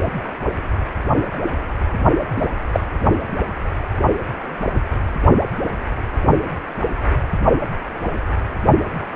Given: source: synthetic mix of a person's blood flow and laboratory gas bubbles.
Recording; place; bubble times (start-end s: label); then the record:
Doppler ultrasound of blood flow; precordium
2.37-2.48 s: bubbles
2.72-2.84 s: bubbles
From the record:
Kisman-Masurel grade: 123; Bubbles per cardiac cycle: 1 to 2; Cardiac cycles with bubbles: 10 to 50%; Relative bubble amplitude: loud (0.450 to 0.775); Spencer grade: 2 (many but less than half of the cardiac periods contain bubble signals, singularly or in groups); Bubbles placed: only in the low amplitude regions of the cardiac cycle